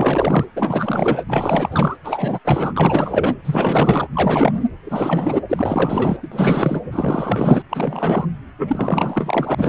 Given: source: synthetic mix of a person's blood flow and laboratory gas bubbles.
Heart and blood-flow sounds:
Doppler ultrasound of blood flow; precordium
0.00-0.45 s: bubbles
0.56-1.24 s: bubbles
1.29-1.97 s: bubbles
2.04-2.39 s: bubbles
2.44-3.35 s: bubbles
3.44-4.08 s: bubbles
4.13-4.63 s: bubbles
4.84-5.42 s: bubbles
5.49-6.18 s: bubbles
6.22-6.29 s: bubbles
6.32-6.82 s: bubbles
6.92-7.62 s: bubbles
7.69-8.26 s: bubbles
8.58-9.69 s: bubbles
From the record:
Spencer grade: 4 (maximum detectable bubble signal sounding continuously throughout systole and diastole of every cardiac period, and overriding the amplitude of the normal cardiac signals); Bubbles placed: anywhere in the cardiac cycle

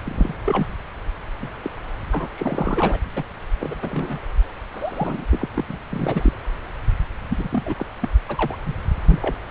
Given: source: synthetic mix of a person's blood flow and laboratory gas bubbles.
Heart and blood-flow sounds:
Doppler ultrasound of blood flow; subclavian vein
0.05-0.34 s: bubbles
0.44-0.66 s: bubbles
1.42-1.51 s: bubbles
1.63-1.71 s: bubbles
2.11-2.28 s: bubbles
2.35-2.98 s: bubbles
3.15-3.24 s: bubbles
3.59-4.20 s: bubbles
4.74-5.25 s: bubbles
5.31-5.49 s: bubbles
5.54-5.65 s: bubbles
5.69-5.77 s: bubbles
5.89-6.33 s: bubbles
7.29-7.86 s: bubbles
8.01-8.09 s: bubbles
8.28-8.57 s: bubbles
8.65-8.75 s: bubbles
9.07-9.37 s: bubbles
From the record:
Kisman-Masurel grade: 242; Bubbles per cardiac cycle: several, 3 to 8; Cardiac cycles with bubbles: 100%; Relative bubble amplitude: moderate (0.250 to 0.450); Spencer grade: 3 (all of the cardiac periods contain showers or single bubble signals, but not dominating or overriding the cardiac motion signals); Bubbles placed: anywhere in the cardiac cycle

